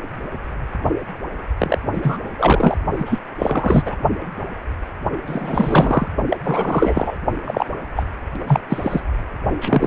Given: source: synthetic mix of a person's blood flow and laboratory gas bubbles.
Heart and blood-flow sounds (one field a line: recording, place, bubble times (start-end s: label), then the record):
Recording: Doppler ultrasound of blood flow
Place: precordium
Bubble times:
1.58-1.78 s: bubbles
1.93-2.18 s: bubbles
2.38-2.78 s: bubbles
2.98-3.20 s: bubbles
3.39-3.83 s: bubbles
3.85-3.97 s: bubbles
5.26-6.08 s: bubbles
6.29-6.37 s: bubbles
6.43-7.17 s: bubbles
7.44-7.66 s: bubbles
7.96-8.04 s: bubbles
8.47-8.60 s: bubbles
8.69-9.02 s: bubbles
9.61-9.87 s: bubbles
From the record:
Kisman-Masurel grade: 333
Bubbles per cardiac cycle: rolling drumbeat, 9 or more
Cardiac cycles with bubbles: 50 to 99%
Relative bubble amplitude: loud (0.450 to 0.775)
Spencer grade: 3 (all of the cardiac periods contain showers or single bubble signals, but not dominating or overriding the cardiac motion signals)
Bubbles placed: only in the low amplitude regions of the cardiac cycle